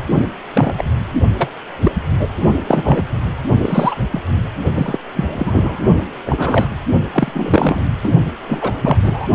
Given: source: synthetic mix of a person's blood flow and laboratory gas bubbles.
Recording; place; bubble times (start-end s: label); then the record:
Doppler ultrasound of blood flow; precordium
0.53-0.84 s: bubbles
1.38-1.49 s: bubbles
1.80-1.92 s: bubbles
2.18-2.27 s: bubbles
2.68-3.03 s: bubbles
3.57-3.95 s: bubbles
4.11-4.21 s: bubbles
4.75-4.98 s: bubbles
5.14-5.81 s: bubbles
6.25-6.69 s: bubbles
7.12-7.83 s: bubbles
8.04-8.12 s: bubbles
8.48-8.73 s: bubbles
8.81-8.96 s: bubbles
9.03-9.28 s: bubbles
From the record:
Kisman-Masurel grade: 243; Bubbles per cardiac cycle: several, 3 to 8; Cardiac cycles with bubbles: 100%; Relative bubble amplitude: loud (0.450 to 0.775); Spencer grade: 3 (all of the cardiac periods contain showers or single bubble signals, but not dominating or overriding the cardiac motion signals); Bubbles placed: only in the low amplitude regions of the cardiac cycle